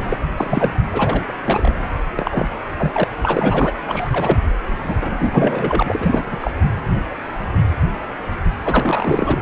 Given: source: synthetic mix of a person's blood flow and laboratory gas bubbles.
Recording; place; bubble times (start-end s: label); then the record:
Doppler ultrasound of blood flow; precordium
0.10-0.18 s: bubbles
0.37-0.75 s: bubbles
0.93-1.24 s: bubbles
1.27-1.33 s: bubbles
1.46-1.72 s: bubbles
2.16-2.48 s: bubbles
2.79-3.04 s: bubbles
3.23-3.80 s: bubbles
3.88-4.10 s: bubbles
4.12-4.38 s: bubbles
4.84-4.97 s: bubbles
5.01-6.22 s: bubbles
6.30-6.37 s: bubbles
6.40-6.52 s: bubbles
8.64-9.40 s: bubbles
From the record:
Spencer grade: 3 (all of the cardiac periods contain showers or single bubble signals, but not dominating or overriding the cardiac motion signals); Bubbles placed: anywhere in the cardiac cycle